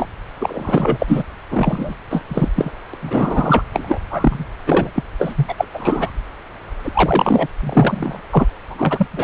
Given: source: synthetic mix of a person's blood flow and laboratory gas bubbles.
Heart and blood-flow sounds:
Doppler ultrasound of blood flow; subclavian vein
0.00-0.09 s: bubbles
0.39-1.23 s: bubbles
1.50-1.94 s: bubbles
2.10-2.25 s: bubbles
2.29-2.48 s: bubbles
2.55-2.71 s: bubbles
2.94-2.96 s: bubbles
3.02-3.63 s: bubbles
3.73-3.99 s: bubbles
4.11-4.45 s: bubbles
4.66-4.91 s: bubbles
4.94-5.04 s: bubbles
5.18-5.54 s: bubbles
5.58-5.65 s: bubbles
5.74-6.11 s: bubbles
6.83-6.92 s: bubbles
6.95-7.47 s: bubbles
7.60-8.20 s: bubbles
8.31-8.46 s: bubbles
8.68-9.06 s: bubbles
9.12-9.24 s: bubbles
From the record:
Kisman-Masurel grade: 333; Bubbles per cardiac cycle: rolling drumbeat, 9 or more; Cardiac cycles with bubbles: 50 to 99%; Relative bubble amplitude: loud (0.450 to 0.775); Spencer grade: 3 (all of the cardiac periods contain showers or single bubble signals, but not dominating or overriding the cardiac motion signals); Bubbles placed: anywhere in the cardiac cycle

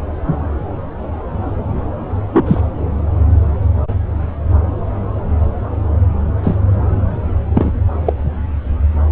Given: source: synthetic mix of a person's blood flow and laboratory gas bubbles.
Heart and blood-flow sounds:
Doppler ultrasound of blood flow; subclavian vein
2.32-2.61 s: bubbles
6.43-6.57 s: bubbles
7.54-7.72 s: bubbles
8.05-8.13 s: bubbles
From the record:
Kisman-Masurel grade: 123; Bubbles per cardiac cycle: 1 to 2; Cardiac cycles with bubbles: 10 to 50%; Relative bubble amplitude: loud (0.450 to 0.775); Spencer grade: 2 (many but less than half of the cardiac periods contain bubble signals, singularly or in groups); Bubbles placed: anywhere in the cardiac cycle

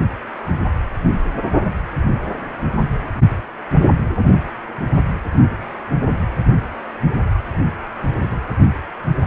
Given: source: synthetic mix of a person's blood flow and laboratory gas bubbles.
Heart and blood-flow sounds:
Doppler ultrasound of blood flow; precordium
8.21-8.37 s: bubbles
From the record:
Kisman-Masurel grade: 111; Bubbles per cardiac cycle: 1 to 2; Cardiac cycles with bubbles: 1 to 10%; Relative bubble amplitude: barely perceptible (0.100 to 0.250); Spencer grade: 1 (occasional bubble signal discernible with the cardiac motion signal, with majority of cardiac periods free of bubbles); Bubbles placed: anywhere in the cardiac cycle

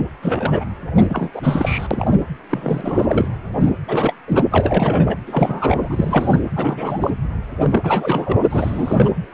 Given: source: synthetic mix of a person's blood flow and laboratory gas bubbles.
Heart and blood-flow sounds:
Doppler ultrasound of blood flow; precordium
0.22-0.65 s: bubbles
0.95-1.30 s: bubbles
1.33-1.88 s: bubbles
1.91-2.11 s: bubbles
2.49-3.28 s: bubbles
3.60-3.72 s: bubbles
3.87-4.14 s: bubbles
4.28-4.42 s: bubbles
4.51-5.17 s: bubbles
5.26-6.40 s: bubbles
6.56-7.11 s: bubbles
7.60-8.43 s: bubbles
8.50-9.12 s: bubbles
9.32-9.34 s: bubbles
From the record:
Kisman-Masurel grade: 342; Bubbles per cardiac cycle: rolling drumbeat, 9 or more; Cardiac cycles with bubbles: 100%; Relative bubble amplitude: moderate (0.250 to 0.450); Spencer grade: 3 (all of the cardiac periods contain showers or single bubble signals, but not dominating or overriding the cardiac motion signals); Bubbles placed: anywhere in the cardiac cycle

